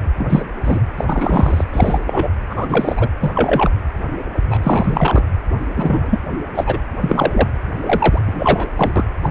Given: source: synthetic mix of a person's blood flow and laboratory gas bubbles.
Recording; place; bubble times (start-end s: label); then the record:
Doppler ultrasound of blood flow; precordium
0.17-0.42 s: bubbles
0.64-0.80 s: bubbles
0.97-1.65 s: bubbles
1.73-2.01 s: bubbles
2.06-2.29 s: bubbles
2.50-3.08 s: bubbles
3.21-3.69 s: bubbles
4.49-5.22 s: bubbles
5.76-6.20 s: bubbles
6.37-6.40 s: bubbles
6.55-6.78 s: bubbles
7.01-7.48 s: bubbles
7.80-8.20 s: bubbles
8.27-8.69 s: bubbles
8.77-9.06 s: bubbles
9.23-9.29 s: bubbles
From the record:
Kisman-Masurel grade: 243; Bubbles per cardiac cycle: several, 3 to 8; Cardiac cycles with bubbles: 100%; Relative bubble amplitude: loud (0.450 to 0.775); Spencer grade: 3 (all of the cardiac periods contain showers or single bubble signals, but not dominating or overriding the cardiac motion signals); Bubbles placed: anywhere in the cardiac cycle